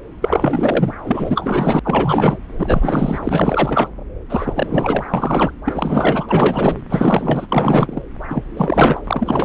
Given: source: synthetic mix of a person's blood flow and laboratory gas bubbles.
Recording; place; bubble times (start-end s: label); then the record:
Doppler ultrasound of blood flow; subclavian vein
0.21-0.93 s: bubbles
1.04-1.79 s: bubbles
1.83-2.36 s: bubbles
2.58-3.19 s: bubbles
3.23-3.90 s: bubbles
4.29-5.04 s: bubbles
5.14-5.51 s: bubbles
5.65-6.76 s: bubbles
6.91-8.01 s: bubbles
8.29-8.43 s: bubbles
8.56-9.01 s: bubbles
9.04-9.45 s: bubbles
From the record:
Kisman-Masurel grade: 444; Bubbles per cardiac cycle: continuous sound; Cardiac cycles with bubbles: 100%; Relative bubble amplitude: maximal (0.775 to 0.999); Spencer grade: 4 (maximum detectable bubble signal sounding continuously throughout systole and diastole of every cardiac period, and overriding the amplitude of the normal cardiac signals); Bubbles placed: anywhere in the cardiac cycle